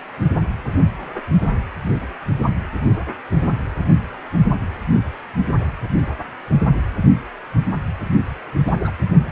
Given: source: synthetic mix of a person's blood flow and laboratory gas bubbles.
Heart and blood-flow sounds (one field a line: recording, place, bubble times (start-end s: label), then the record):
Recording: Doppler ultrasound of blood flow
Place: precordium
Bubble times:
8.66-8.72 s: bubbles
8.79-8.90 s: bubbles
From the record:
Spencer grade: 1 (occasional bubble signal discernible with the cardiac motion signal, with majority of cardiac periods free of bubbles)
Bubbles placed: anywhere in the cardiac cycle